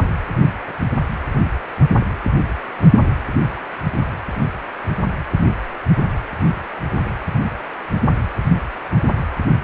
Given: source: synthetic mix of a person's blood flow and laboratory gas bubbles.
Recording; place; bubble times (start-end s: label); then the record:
Doppler ultrasound of blood flow; precordium
no bubbles
From the record:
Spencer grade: 0 (complete lack of bubble signals)